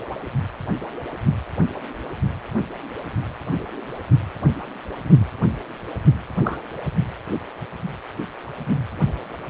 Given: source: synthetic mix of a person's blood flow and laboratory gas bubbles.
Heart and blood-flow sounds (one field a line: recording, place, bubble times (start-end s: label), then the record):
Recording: Doppler ultrasound of blood flow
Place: precordium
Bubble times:
6.44-6.59 s: bubbles
From the record:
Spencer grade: 1 (occasional bubble signal discernible with the cardiac motion signal, with majority of cardiac periods free of bubbles)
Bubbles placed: anywhere in the cardiac cycle